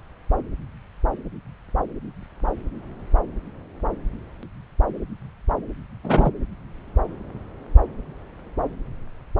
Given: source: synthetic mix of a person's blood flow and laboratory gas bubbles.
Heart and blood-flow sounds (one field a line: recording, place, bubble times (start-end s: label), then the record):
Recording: Doppler ultrasound of blood flow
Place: subclavian vein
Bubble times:
6.03-6.31 s: bubbles
From the record:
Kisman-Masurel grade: 113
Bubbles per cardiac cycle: 1 to 2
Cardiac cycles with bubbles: 1 to 10%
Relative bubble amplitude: loud (0.450 to 0.775)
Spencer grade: 1 (occasional bubble signal discernible with the cardiac motion signal, with majority of cardiac periods free of bubbles)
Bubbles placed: anywhere in the cardiac cycle